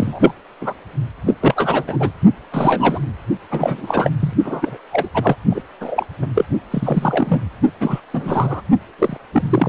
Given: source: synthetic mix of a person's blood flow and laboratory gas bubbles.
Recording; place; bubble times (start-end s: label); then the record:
Doppler ultrasound of blood flow; precordium
0.00-0.32 s: bubbles
0.61-0.73 s: bubbles
1.26-1.35 s: bubbles
1.41-1.83 s: bubbles
1.87-2.12 s: bubbles
2.52-2.99 s: bubbles
3.50-4.11 s: bubbles
4.19-4.33 s: bubbles
4.43-4.77 s: bubbles
4.92-5.08 s: bubbles
5.14-5.36 s: bubbles
5.49-5.62 s: bubbles
5.80-6.06 s: bubbles
6.21-6.27 s: bubbles
6.34-6.44 s: bubbles
6.70-7.40 s: bubbles
7.80-8.00 s: bubbles
8.13-8.62 s: bubbles
8.98-9.17 s: bubbles
9.32-9.69 s: bubbles
From the record:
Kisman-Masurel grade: 233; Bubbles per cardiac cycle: several, 3 to 8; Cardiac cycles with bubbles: 50 to 99%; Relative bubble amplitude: loud (0.450 to 0.775); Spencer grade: 3 (all of the cardiac periods contain showers or single bubble signals, but not dominating or overriding the cardiac motion signals); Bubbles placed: only in the low amplitude regions of the cardiac cycle